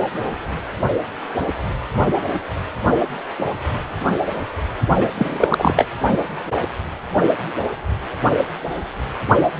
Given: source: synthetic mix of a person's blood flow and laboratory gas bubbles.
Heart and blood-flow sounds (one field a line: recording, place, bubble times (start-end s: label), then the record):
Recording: Doppler ultrasound of blood flow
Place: precordium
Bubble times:
4.96-5.08 s: bubbles
5.17-5.38 s: bubbles
5.41-5.85 s: bubbles
From the record:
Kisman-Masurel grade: 213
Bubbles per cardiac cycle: several, 3 to 8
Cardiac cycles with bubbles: 1 to 10%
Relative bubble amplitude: loud (0.450 to 0.775)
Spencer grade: 1 (occasional bubble signal discernible with the cardiac motion signal, with majority of cardiac periods free of bubbles)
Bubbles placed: only in the low amplitude regions of the cardiac cycle